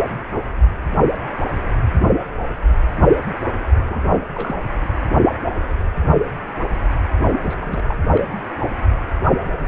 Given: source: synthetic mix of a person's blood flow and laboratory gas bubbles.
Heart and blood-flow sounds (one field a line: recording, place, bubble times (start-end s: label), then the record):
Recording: Doppler ultrasound of blood flow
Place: precordium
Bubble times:
3.85-4.20 s: bubbles
4.34-4.56 s: bubbles
7.42-7.56 s: bubbles
7.60-7.84 s: bubbles
7.87-7.96 s: bubbles
8.15-8.34 s: bubbles
From the record:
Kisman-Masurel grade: 221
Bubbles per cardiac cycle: several, 3 to 8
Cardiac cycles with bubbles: 10 to 50%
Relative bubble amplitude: barely perceptible (0.100 to 0.250)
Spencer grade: 2 (many but less than half of the cardiac periods contain bubble signals, singularly or in groups)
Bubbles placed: anywhere in the cardiac cycle